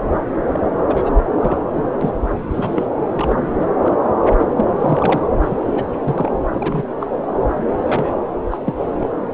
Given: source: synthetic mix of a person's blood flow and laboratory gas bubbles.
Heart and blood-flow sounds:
Doppler ultrasound of blood flow; subclavian vein
0.52-0.64 s: bubbles
0.87-1.10 s: bubbles
1.40-1.57 s: bubbles
1.76-1.85 s: bubbles
2.01-2.12 s: bubbles
2.51-2.87 s: bubbles
3.14-3.52 s: bubbles
3.60-3.66 s: bubbles
3.82-3.96 s: bubbles
4.25-4.33 s: bubbles
4.38-4.48 s: bubbles
4.57-4.65 s: bubbles
4.79-5.32 s: bubbles
5.50-5.57 s: bubbles
5.67-5.72 s: bubbles
5.75-5.85 s: bubbles
6.04-6.32 s: bubbles
6.56-6.87 s: bubbles
6.99-7.07 s: bubbles
7.41-7.46 s: bubbles
7.86-8.14 s: bubbles
8.51-8.58 s: bubbles
8.64-8.74 s: bubbles
8.99-9.09 s: bubbles
From the record:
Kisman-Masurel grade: 242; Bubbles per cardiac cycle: several, 3 to 8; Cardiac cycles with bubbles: 100%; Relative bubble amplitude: moderate (0.250 to 0.450); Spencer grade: 3 (all of the cardiac periods contain showers or single bubble signals, but not dominating or overriding the cardiac motion signals); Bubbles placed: anywhere in the cardiac cycle

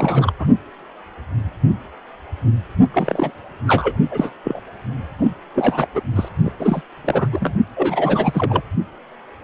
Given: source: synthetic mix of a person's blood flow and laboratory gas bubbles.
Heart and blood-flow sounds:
Doppler ultrasound of blood flow; precordium
0.00-0.33 s: bubbles
0.39-0.47 s: bubbles
2.93-3.32 s: bubbles
3.67-3.99 s: bubbles
4.11-4.33 s: bubbles
4.44-4.60 s: bubbles
5.20-5.33 s: bubbles
5.54-5.88 s: bubbles
5.95-6.01 s: bubbles
6.15-6.29 s: bubbles
6.45-6.51 s: bubbles
6.58-6.82 s: bubbles
7.04-7.28 s: bubbles
7.32-7.54 s: bubbles
7.75-8.62 s: bubbles
From the record:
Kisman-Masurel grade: 332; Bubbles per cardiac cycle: rolling drumbeat, 9 or more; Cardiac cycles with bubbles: 50 to 99%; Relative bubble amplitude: moderate (0.250 to 0.450); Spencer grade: 3 (all of the cardiac periods contain showers or single bubble signals, but not dominating or overriding the cardiac motion signals); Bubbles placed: only in the low amplitude regions of the cardiac cycle

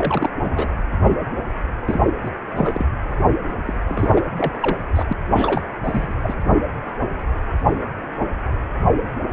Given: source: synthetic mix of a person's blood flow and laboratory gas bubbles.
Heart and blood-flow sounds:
Doppler ultrasound of blood flow; precordium
0.00-0.30 s: bubbles
0.42-0.72 s: bubbles
1.85-2.01 s: bubbles
2.24-2.31 s: bubbles
2.54-2.86 s: bubbles
3.67-3.74 s: bubbles
3.88-4.29 s: bubbles
4.37-4.52 s: bubbles
4.60-4.77 s: bubbles
4.95-5.05 s: bubbles
5.08-5.13 s: bubbles
5.30-5.63 s: bubbles
5.84-6.15 s: bubbles
6.23-6.34 s: bubbles
From the record:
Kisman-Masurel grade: 332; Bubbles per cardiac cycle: rolling drumbeat, 9 or more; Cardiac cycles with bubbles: 50 to 99%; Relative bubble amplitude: moderate (0.250 to 0.450); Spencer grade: 3 (all of the cardiac periods contain showers or single bubble signals, but not dominating or overriding the cardiac motion signals); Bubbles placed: anywhere in the cardiac cycle

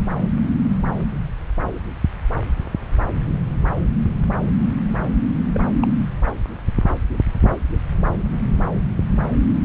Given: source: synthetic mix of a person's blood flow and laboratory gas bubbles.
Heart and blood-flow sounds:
Doppler ultrasound of blood flow; subclavian vein
5.53-5.60 s: bubbles
5.82-5.88 s: bubbles
From the record:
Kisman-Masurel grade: 111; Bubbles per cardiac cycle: 1 to 2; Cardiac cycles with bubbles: 1 to 10%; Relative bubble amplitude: barely perceptible (0.100 to 0.250); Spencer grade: 1 (occasional bubble signal discernible with the cardiac motion signal, with majority of cardiac periods free of bubbles); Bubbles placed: anywhere in the cardiac cycle

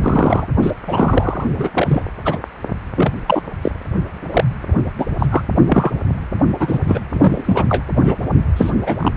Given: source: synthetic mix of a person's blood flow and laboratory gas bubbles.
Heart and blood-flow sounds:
Doppler ultrasound of blood flow; precordium
0.01-0.48 s: bubbles
0.62-0.71 s: bubbles
0.87-1.44 s: bubbles
1.57-1.68 s: bubbles
1.74-2.04 s: bubbles
2.25-2.38 s: bubbles
2.96-3.12 s: bubbles
3.27-3.42 s: bubbles
3.62-3.71 s: bubbles
4.33-4.44 s: bubbles
4.97-5.05 s: bubbles
5.18-5.26 s: bubbles
5.30-5.42 s: bubbles
5.67-5.90 s: bubbles
6.59-6.79 s: bubbles
6.88-7.00 s: bubbles
7.09-7.65 s: bubbles
7.69-7.84 s: bubbles
7.96-8.17 s: bubbles
8.56-8.71 s: bubbles
8.85-8.96 s: bubbles
8.99-9.12 s: bubbles
From the record:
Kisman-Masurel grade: 243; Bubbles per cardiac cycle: several, 3 to 8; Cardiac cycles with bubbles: 100%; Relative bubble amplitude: loud (0.450 to 0.775); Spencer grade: 3 (all of the cardiac periods contain showers or single bubble signals, but not dominating or overriding the cardiac motion signals); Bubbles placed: only in the low amplitude regions of the cardiac cycle

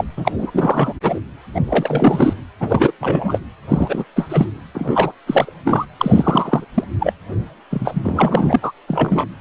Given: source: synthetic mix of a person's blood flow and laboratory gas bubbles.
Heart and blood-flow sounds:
Doppler ultrasound of blood flow; precordium
0.00-0.04 s: bubbles
0.17-0.31 s: bubbles
0.38-0.93 s: bubbles
1.02-1.19 s: bubbles
1.54-1.60 s: bubbles
1.64-2.33 s: bubbles
2.60-2.92 s: bubbles
3.00-3.40 s: bubbles
3.69-4.04 s: bubbles
4.16-4.46 s: bubbles
4.74-5.12 s: bubbles
5.26-5.51 s: bubbles
5.64-5.86 s: bubbles
5.99-6.66 s: bubbles
6.74-6.83 s: bubbles
7.00-7.13 s: bubbles
7.71-8.72 s: bubbles
8.88-9.26 s: bubbles
From the record:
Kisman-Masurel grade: 343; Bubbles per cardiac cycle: rolling drumbeat, 9 or more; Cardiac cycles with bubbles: 100%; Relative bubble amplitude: loud (0.450 to 0.775); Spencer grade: 3 (all of the cardiac periods contain showers or single bubble signals, but not dominating or overriding the cardiac motion signals); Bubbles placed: anywhere in the cardiac cycle

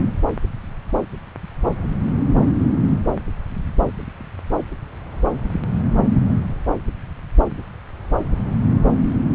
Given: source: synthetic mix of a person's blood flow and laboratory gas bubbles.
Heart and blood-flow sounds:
Doppler ultrasound of blood flow; subclavian vein
no bubbles
From the record:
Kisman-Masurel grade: 000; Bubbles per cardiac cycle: 0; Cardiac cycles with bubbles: 0%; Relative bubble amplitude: no bubbles discernible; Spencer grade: 0 (complete lack of bubble signals)

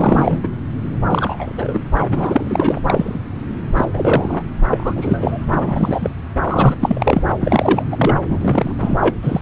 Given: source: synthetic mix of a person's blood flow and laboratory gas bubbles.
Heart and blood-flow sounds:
Doppler ultrasound of blood flow; subclavian vein
0.00-0.39 s: bubbles
0.43-0.48 s: bubbles
1.10-1.80 s: bubbles
1.98-2.04 s: bubbles
2.08-2.80 s: bubbles
2.87-3.20 s: bubbles
3.77-3.85 s: bubbles
3.93-4.43 s: bubbles
4.71-5.46 s: bubbles
5.51-6.13 s: bubbles
6.44-6.75 s: bubbles
6.80-7.22 s: bubbles
7.40-7.83 s: bubbles
7.91-8.16 s: bubbles
8.24-8.38 s: bubbles
8.41-8.73 s: bubbles
8.78-8.97 s: bubbles
9.00-9.15 s: bubbles
9.22-9.41 s: bubbles
From the record:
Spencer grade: 3 (all of the cardiac periods contain showers or single bubble signals, but not dominating or overriding the cardiac motion signals); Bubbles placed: anywhere in the cardiac cycle

